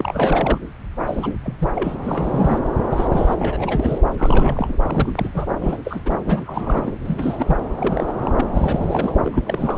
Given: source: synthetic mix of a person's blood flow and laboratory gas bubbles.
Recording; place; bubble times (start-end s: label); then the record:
Doppler ultrasound of blood flow; subclavian vein
0.00-0.58 s: bubbles
1.06-1.33 s: bubbles
1.44-1.69 s: bubbles
1.75-1.95 s: bubbles
2.04-2.58 s: bubbles
2.83-3.08 s: bubbles
3.10-3.99 s: bubbles
4.17-4.79 s: bubbles
4.86-5.46 s: bubbles
5.60-5.82 s: bubbles
5.84-6.01 s: bubbles
6.04-6.17 s: bubbles
6.28-6.94 s: bubbles
7.04-7.60 s: bubbles
7.77-8.14 s: bubbles
8.22-8.31 s: bubbles
8.37-8.45 s: bubbles
8.53-9.15 s: bubbles
9.23-9.44 s: bubbles
9.46-9.78 s: bubbles
From the record:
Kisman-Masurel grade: 342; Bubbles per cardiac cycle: rolling drumbeat, 9 or more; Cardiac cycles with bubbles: 100%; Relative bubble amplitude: moderate (0.250 to 0.450); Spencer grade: 3 (all of the cardiac periods contain showers or single bubble signals, but not dominating or overriding the cardiac motion signals); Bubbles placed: anywhere in the cardiac cycle